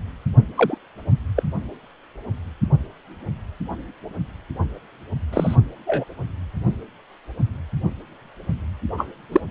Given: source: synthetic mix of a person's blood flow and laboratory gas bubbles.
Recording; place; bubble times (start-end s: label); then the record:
Doppler ultrasound of blood flow; precordium
0.55-0.77 s: bubbles
1.36-1.43 s: bubbles
5.32-5.56 s: bubbles
5.86-6.04 s: bubbles
8.97-9.06 s: bubbles
9.32-9.41 s: bubbles
From the record:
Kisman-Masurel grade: 123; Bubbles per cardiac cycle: 1 to 2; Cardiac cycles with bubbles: 10 to 50%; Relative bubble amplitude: loud (0.450 to 0.775); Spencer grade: 2 (many but less than half of the cardiac periods contain bubble signals, singularly or in groups); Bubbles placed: only in the low amplitude regions of the cardiac cycle